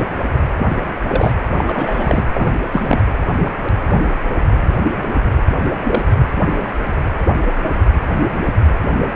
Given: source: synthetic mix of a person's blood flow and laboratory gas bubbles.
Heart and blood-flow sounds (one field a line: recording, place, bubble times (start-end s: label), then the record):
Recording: Doppler ultrasound of blood flow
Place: precordium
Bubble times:
0.57-0.71 s: bubbles
1.07-1.32 s: bubbles
1.56-1.64 s: bubbles
1.67-2.25 s: bubbles
2.33-2.53 s: bubbles
2.71-3.01 s: bubbles
5.80-6.03 s: bubbles
From the record:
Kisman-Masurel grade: 222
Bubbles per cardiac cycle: several, 3 to 8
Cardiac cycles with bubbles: 10 to 50%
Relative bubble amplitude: moderate (0.250 to 0.450)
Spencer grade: 2 (many but less than half of the cardiac periods contain bubble signals, singularly or in groups)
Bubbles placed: anywhere in the cardiac cycle